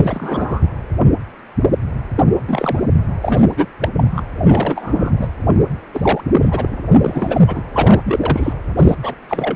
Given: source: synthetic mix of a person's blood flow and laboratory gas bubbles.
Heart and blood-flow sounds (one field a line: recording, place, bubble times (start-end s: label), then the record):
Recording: Doppler ultrasound of blood flow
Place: precordium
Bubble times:
0.00-0.69 s: bubbles
2.16-2.25 s: bubbles
2.48-2.82 s: bubbles
2.88-2.94 s: bubbles
3.21-3.66 s: bubbles
3.81-3.89 s: bubbles
3.95-4.22 s: bubbles
4.41-5.28 s: bubbles
5.94-6.22 s: bubbles
6.32-6.77 s: bubbles
7.00-7.63 s: bubbles
7.72-8.53 s: bubbles
8.77-8.95 s: bubbles
9.02-9.15 s: bubbles
9.28-9.56 s: bubbles
From the record:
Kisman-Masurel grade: 333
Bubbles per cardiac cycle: rolling drumbeat, 9 or more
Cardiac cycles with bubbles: 50 to 99%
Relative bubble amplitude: loud (0.450 to 0.775)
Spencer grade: 3 (all of the cardiac periods contain showers or single bubble signals, but not dominating or overriding the cardiac motion signals)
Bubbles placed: anywhere in the cardiac cycle